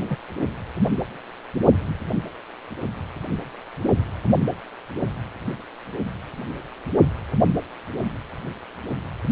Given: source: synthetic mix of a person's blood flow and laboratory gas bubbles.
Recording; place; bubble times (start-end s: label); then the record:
Doppler ultrasound of blood flow; precordium
0.00-0.18 s: bubbles
From the record:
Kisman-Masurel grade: 222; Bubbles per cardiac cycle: several, 3 to 8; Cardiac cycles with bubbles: 10 to 50%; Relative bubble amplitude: moderate (0.250 to 0.450); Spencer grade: 2 (many but less than half of the cardiac periods contain bubble signals, singularly or in groups); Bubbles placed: only in the low amplitude regions of the cardiac cycle